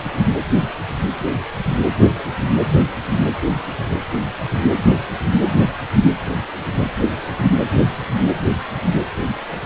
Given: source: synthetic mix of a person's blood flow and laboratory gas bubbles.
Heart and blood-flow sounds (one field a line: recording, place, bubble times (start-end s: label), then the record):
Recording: Doppler ultrasound of blood flow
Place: precordium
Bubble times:
no bubbles
From the record:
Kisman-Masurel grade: 000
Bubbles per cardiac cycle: 0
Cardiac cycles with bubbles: 0%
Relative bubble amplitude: no bubbles discernible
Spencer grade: 0 (complete lack of bubble signals)